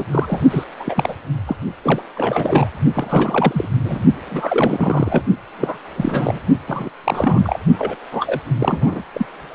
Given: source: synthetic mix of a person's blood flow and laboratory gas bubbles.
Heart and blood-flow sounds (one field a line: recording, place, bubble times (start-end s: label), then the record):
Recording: Doppler ultrasound of blood flow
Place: precordium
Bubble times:
0.00-0.04 s: bubbles
0.11-0.40 s: bubbles
0.50-0.64 s: bubbles
0.80-1.15 s: bubbles
1.46-1.56 s: bubbles
1.83-2.03 s: bubbles
2.15-2.69 s: bubbles
2.94-3.69 s: bubbles
3.83-4.06 s: bubbles
4.26-5.25 s: bubbles
5.58-5.78 s: bubbles
5.97-6.39 s: bubbles
6.67-6.90 s: bubbles
7.04-7.58 s: bubbles
7.78-7.96 s: bubbles
8.11-8.40 s: bubbles
8.58-9.02 s: bubbles
9.12-9.26 s: bubbles
From the record:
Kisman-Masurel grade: 342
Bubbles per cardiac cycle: rolling drumbeat, 9 or more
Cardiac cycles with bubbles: 100%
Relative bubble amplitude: moderate (0.250 to 0.450)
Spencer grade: 3 (all of the cardiac periods contain showers or single bubble signals, but not dominating or overriding the cardiac motion signals)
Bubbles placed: only in the low amplitude regions of the cardiac cycle